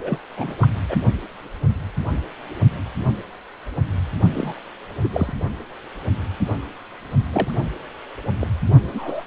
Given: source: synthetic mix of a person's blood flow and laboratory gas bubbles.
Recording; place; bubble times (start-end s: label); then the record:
Doppler ultrasound of blood flow; precordium
0.01-0.18 s: bubbles
0.37-0.54 s: bubbles
0.60-0.68 s: bubbles
0.89-0.98 s: bubbles
4.33-4.59 s: bubbles
5.03-5.09 s: bubbles
5.12-5.33 s: bubbles
7.33-7.51 s: bubbles
8.40-8.48 s: bubbles
8.94-9.24 s: bubbles
From the record:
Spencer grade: 3 (all of the cardiac periods contain showers or single bubble signals, but not dominating or overriding the cardiac motion signals); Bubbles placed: only in the low amplitude regions of the cardiac cycle